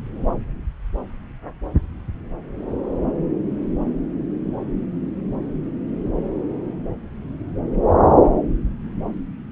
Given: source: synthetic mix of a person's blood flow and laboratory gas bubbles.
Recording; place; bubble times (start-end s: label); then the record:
Doppler ultrasound of blood flow; subclavian vein
no bubbles
From the record:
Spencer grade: 0 (complete lack of bubble signals)